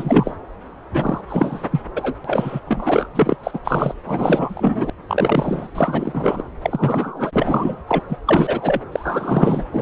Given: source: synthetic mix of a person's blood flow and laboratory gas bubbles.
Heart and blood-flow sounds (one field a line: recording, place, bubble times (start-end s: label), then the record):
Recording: Doppler ultrasound of blood flow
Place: subclavian vein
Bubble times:
0.00-0.36 s: bubbles
0.93-1.21 s: bubbles
1.27-1.67 s: bubbles
1.71-1.80 s: bubbles
1.96-2.16 s: bubbles
2.24-2.60 s: bubbles
2.66-3.07 s: bubbles
3.15-3.37 s: bubbles
3.43-3.60 s: bubbles
3.64-3.93 s: bubbles
4.06-4.90 s: bubbles
5.08-5.67 s: bubbles
5.75-6.43 s: bubbles
6.62-7.77 s: bubbles
7.87-8.02 s: bubbles
8.09-8.18 s: bubbles
8.27-8.81 s: bubbles
8.92-9.64 s: bubbles
9.72-9.82 s: bubbles
From the record:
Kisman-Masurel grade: 343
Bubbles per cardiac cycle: rolling drumbeat, 9 or more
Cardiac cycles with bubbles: 100%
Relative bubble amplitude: loud (0.450 to 0.775)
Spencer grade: 3 (all of the cardiac periods contain showers or single bubble signals, but not dominating or overriding the cardiac motion signals)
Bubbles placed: anywhere in the cardiac cycle